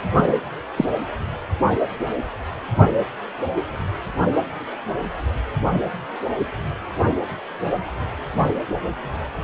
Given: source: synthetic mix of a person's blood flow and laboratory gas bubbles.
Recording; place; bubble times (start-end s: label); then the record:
Doppler ultrasound of blood flow; precordium
0.77-0.85 s: bubbles
From the record:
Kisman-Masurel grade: 112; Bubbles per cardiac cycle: 1 to 2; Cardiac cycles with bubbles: 1 to 10%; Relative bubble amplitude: moderate (0.250 to 0.450); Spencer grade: 1 (occasional bubble signal discernible with the cardiac motion signal, with majority of cardiac periods free of bubbles); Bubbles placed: anywhere in the cardiac cycle